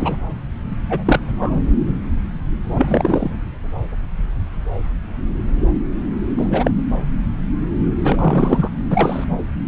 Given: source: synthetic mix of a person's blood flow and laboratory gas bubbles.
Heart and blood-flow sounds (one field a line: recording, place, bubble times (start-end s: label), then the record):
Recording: Doppler ultrasound of blood flow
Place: subclavian vein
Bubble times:
0.00-0.17 s: bubbles
0.89-1.20 s: bubbles
1.24-1.53 s: bubbles
2.72-3.30 s: bubbles
6.37-6.71 s: bubbles
8.04-8.70 s: bubbles
8.90-9.24 s: bubbles
From the record:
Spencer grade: 2 (many but less than half of the cardiac periods contain bubble signals, singularly or in groups)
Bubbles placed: anywhere in the cardiac cycle